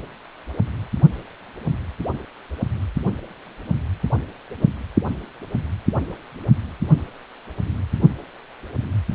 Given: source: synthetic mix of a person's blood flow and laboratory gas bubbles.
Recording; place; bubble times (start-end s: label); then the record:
Doppler ultrasound of blood flow; precordium
4.61-4.66 s: bubbles
From the record:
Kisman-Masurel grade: 111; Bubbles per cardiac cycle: 1 to 2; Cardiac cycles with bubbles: 1 to 10%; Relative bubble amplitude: barely perceptible (0.100 to 0.250); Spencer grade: 1 (occasional bubble signal discernible with the cardiac motion signal, with majority of cardiac periods free of bubbles); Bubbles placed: only in the low amplitude regions of the cardiac cycle